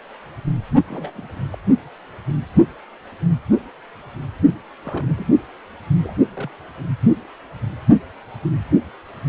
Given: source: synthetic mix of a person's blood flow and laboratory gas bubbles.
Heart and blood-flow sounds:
Doppler ultrasound of blood flow; precordium
0.85-1.42 s: bubbles
1.51-1.58 s: bubbles
4.83-5.28 s: bubbles
6.03-6.26 s: bubbles
6.33-6.51 s: bubbles
From the record:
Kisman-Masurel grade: 221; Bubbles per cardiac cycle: several, 3 to 8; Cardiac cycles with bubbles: 10 to 50%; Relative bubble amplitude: barely perceptible (0.100 to 0.250); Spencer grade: 2 (many but less than half of the cardiac periods contain bubble signals, singularly or in groups); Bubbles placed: only in the low amplitude regions of the cardiac cycle

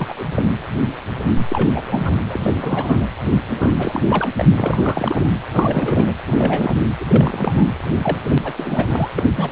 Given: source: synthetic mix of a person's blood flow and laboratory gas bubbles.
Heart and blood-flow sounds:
Doppler ultrasound of blood flow; precordium
0.00-0.15 s: bubbles
0.17-0.26 s: bubbles
0.34-0.52 s: bubbles
1.49-2.16 s: bubbles
2.29-3.07 s: bubbles
3.49-4.03 s: bubbles
4.08-4.29 s: bubbles
4.36-4.45 s: bubbles
4.54-5.29 s: bubbles
5.51-6.12 s: bubbles
6.27-6.76 s: bubbles
7.00-7.06 s: bubbles
7.08-7.65 s: bubbles
8.04-8.18 s: bubbles
8.29-8.38 s: bubbles
8.44-8.53 s: bubbles
8.57-9.09 s: bubbles
9.18-9.27 s: bubbles
9.37-9.52 s: bubbles
From the record:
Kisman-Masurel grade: 332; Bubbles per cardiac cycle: rolling drumbeat, 9 or more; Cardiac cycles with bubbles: 50 to 99%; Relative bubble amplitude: moderate (0.250 to 0.450); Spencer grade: 3 (all of the cardiac periods contain showers or single bubble signals, but not dominating or overriding the cardiac motion signals); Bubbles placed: anywhere in the cardiac cycle

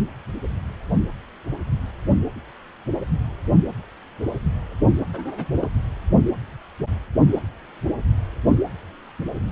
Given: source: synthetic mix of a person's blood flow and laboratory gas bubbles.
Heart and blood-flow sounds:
Doppler ultrasound of blood flow; precordium
5.13-5.47 s: bubbles
5.61-5.69 s: bubbles
From the record:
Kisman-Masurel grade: 111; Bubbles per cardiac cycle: 1 to 2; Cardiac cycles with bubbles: 1 to 10%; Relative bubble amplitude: barely perceptible (0.100 to 0.250); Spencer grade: 1 (occasional bubble signal discernible with the cardiac motion signal, with majority of cardiac periods free of bubbles); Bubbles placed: only in the low amplitude regions of the cardiac cycle

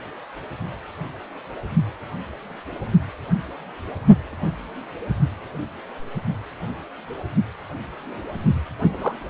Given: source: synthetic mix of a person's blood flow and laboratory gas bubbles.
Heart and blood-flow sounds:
Doppler ultrasound of blood flow; precordium
8.79-9.21 s: bubbles
From the record:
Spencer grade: 1 (occasional bubble signal discernible with the cardiac motion signal, with majority of cardiac periods free of bubbles); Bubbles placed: anywhere in the cardiac cycle

